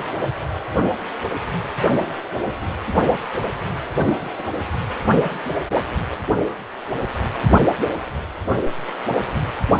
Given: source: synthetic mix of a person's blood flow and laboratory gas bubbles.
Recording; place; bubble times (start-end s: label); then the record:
Doppler ultrasound of blood flow; precordium
4.21-4.29 s: bubbles
4.35-4.45 s: bubbles
From the record:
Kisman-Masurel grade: 121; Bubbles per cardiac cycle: 1 to 2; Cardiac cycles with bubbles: 10 to 50%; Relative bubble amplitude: barely perceptible (0.100 to 0.250); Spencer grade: 2 (many but less than half of the cardiac periods contain bubble signals, singularly or in groups); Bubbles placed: only in the low amplitude regions of the cardiac cycle